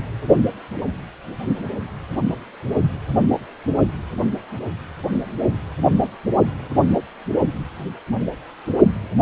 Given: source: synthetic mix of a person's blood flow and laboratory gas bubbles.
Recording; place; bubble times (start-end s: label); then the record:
Doppler ultrasound of blood flow; precordium
no bubbles
From the record:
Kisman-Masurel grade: 000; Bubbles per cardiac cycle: 0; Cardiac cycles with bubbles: 0%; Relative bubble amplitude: no bubbles discernible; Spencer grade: 0 (complete lack of bubble signals)